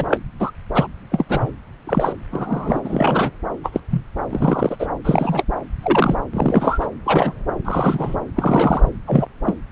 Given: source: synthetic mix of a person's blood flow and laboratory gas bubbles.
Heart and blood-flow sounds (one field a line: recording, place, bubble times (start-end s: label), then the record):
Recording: Doppler ultrasound of blood flow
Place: subclavian vein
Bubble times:
0.00-0.20 s: bubbles
0.40-0.51 s: bubbles
0.74-0.87 s: bubbles
1.11-1.25 s: bubbles
1.29-1.51 s: bubbles
1.87-2.12 s: bubbles
2.31-2.81 s: bubbles
2.84-3.31 s: bubbles
3.63-3.80 s: bubbles
3.90-4.01 s: bubbles
4.29-4.76 s: bubbles
4.79-4.87 s: bubbles
5.04-5.43 s: bubbles
5.82-6.16 s: bubbles
6.33-6.87 s: bubbles
7.05-7.32 s: bubbles
7.64-8.17 s: bubbles
8.36-8.81 s: bubbles
9.07-9.25 s: bubbles
9.46-9.55 s: bubbles
From the record:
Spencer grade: 3 (all of the cardiac periods contain showers or single bubble signals, but not dominating or overriding the cardiac motion signals)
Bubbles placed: anywhere in the cardiac cycle